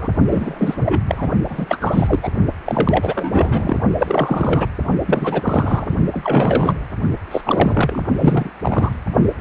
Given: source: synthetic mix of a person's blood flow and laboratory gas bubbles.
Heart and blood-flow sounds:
Doppler ultrasound of blood flow; precordium
0.00-0.12 s: bubbles
0.27-1.01 s: bubbles
1.07-1.31 s: bubbles
1.50-1.78 s: bubbles
1.80-2.19 s: bubbles
2.22-2.28 s: bubbles
2.65-3.77 s: bubbles
3.97-4.67 s: bubbles
5.06-5.96 s: bubbles
6.12-6.75 s: bubbles
7.31-7.41 s: bubbles
7.45-8.06 s: bubbles
8.18-8.50 s: bubbles
8.62-8.92 s: bubbles
From the record:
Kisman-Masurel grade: 343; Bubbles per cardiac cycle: rolling drumbeat, 9 or more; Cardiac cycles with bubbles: 100%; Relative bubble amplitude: loud (0.450 to 0.775); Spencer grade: 3 (all of the cardiac periods contain showers or single bubble signals, but not dominating or overriding the cardiac motion signals); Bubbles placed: only in the low amplitude regions of the cardiac cycle

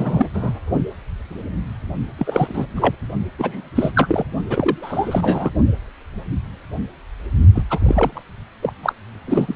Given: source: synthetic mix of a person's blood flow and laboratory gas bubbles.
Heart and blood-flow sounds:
Doppler ultrasound of blood flow; precordium
0.00-0.27 s: bubbles
0.34-0.51 s: bubbles
2.17-2.66 s: bubbles
2.75-2.95 s: bubbles
3.38-3.70 s: bubbles
3.75-3.92 s: bubbles
3.94-4.24 s: bubbles
4.50-5.54 s: bubbles
7.54-7.62 s: bubbles
7.69-8.23 s: bubbles
8.62-8.73 s: bubbles
8.83-8.94 s: bubbles
9.26-9.56 s: bubbles
From the record:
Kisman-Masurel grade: 333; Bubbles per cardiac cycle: rolling drumbeat, 9 or more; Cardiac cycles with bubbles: 50 to 99%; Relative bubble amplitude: loud (0.450 to 0.775); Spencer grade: 3 (all of the cardiac periods contain showers or single bubble signals, but not dominating or overriding the cardiac motion signals); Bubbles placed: only in the low amplitude regions of the cardiac cycle

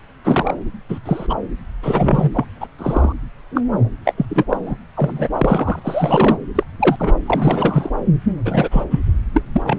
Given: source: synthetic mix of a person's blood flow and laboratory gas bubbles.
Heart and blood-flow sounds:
Doppler ultrasound of blood flow; subclavian vein
0.24-0.54 s: bubbles
0.89-0.99 s: bubbles
1.06-1.27 s: bubbles
1.29-1.34 s: bubbles
1.83-2.31 s: bubbles
2.33-2.45 s: bubbles
2.60-2.68 s: bubbles
2.78-3.12 s: bubbles
3.54-3.61 s: bubbles
4.05-4.12 s: bubbles
4.17-4.25 s: bubbles
4.29-4.45 s: bubbles
4.49-4.57 s: bubbles
4.66-4.76 s: bubbles
4.96-5.29 s: bubbles
5.33-5.79 s: bubbles
5.84-6.37 s: bubbles
6.55-6.63 s: bubbles
6.79-6.96 s: bubbles
6.99-7.12 s: bubbles
7.26-7.92 s: bubbles
8.45-8.69 s: bubbles
8.71-8.84 s: bubbles
8.90-9.01 s: bubbles
9.33-9.43 s: bubbles
9.53-9.79 s: bubbles
From the record:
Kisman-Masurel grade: 233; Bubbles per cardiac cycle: several, 3 to 8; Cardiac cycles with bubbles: 50 to 99%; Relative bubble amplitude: loud (0.450 to 0.775); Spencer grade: 3 (all of the cardiac periods contain showers or single bubble signals, but not dominating or overriding the cardiac motion signals); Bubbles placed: anywhere in the cardiac cycle

